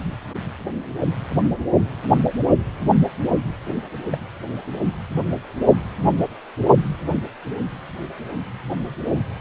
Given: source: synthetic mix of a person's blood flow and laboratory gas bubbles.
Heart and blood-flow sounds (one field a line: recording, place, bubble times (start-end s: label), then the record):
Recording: Doppler ultrasound of blood flow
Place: precordium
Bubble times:
3.66-3.73 s: bubbles
4.12-4.17 s: bubbles
From the record:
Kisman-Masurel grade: 111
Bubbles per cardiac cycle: 1 to 2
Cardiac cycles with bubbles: 1 to 10%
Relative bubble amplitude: barely perceptible (0.100 to 0.250)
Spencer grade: 1 (occasional bubble signal discernible with the cardiac motion signal, with majority of cardiac periods free of bubbles)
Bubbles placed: only in the low amplitude regions of the cardiac cycle